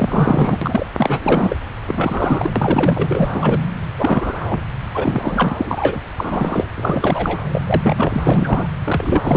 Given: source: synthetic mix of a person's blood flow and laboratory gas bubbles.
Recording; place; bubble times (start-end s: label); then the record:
Doppler ultrasound of blood flow; subclavian vein
0.00-0.58 s: bubbles
0.61-0.87 s: bubbles
0.97-1.56 s: bubbles
1.87-2.50 s: bubbles
2.56-3.29 s: bubbles
3.33-3.60 s: bubbles
3.98-4.34 s: bubbles
4.49-4.59 s: bubbles
4.93-5.55 s: bubbles
5.58-6.00 s: bubbles
6.17-6.65 s: bubbles
6.74-7.38 s: bubbles
7.52-7.61 s: bubbles
7.67-8.20 s: bubbles
8.24-8.67 s: bubbles
8.84-9.37 s: bubbles
From the record:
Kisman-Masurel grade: 343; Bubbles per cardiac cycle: rolling drumbeat, 9 or more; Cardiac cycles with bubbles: 100%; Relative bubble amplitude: loud (0.450 to 0.775); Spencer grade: 3 (all of the cardiac periods contain showers or single bubble signals, but not dominating or overriding the cardiac motion signals); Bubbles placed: anywhere in the cardiac cycle